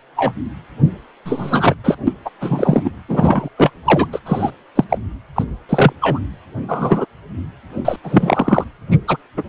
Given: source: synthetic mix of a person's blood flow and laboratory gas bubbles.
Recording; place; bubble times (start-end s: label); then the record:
Doppler ultrasound of blood flow; precordium
0.16-0.34 s: bubbles
1.25-1.74 s: bubbles
1.84-1.96 s: bubbles
2.07-2.13 s: bubbles
2.25-2.29 s: bubbles
2.41-2.90 s: bubbles
3.08-3.48 s: bubbles
3.57-3.70 s: bubbles
3.84-4.07 s: bubbles
4.12-4.20 s: bubbles
4.26-4.50 s: bubbles
4.75-4.84 s: bubbles
4.89-4.98 s: bubbles
5.35-5.45 s: bubbles
5.69-5.92 s: bubbles
6.01-6.19 s: bubbles
6.68-7.05 s: bubbles
7.85-7.96 s: bubbles
8.04-8.64 s: bubbles
8.90-8.97 s: bubbles
9.07-9.17 s: bubbles
9.37-9.44 s: bubbles
From the record:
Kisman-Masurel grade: 243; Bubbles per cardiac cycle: several, 3 to 8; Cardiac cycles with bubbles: 100%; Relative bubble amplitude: loud (0.450 to 0.775); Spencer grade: 3 (all of the cardiac periods contain showers or single bubble signals, but not dominating or overriding the cardiac motion signals); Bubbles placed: anywhere in the cardiac cycle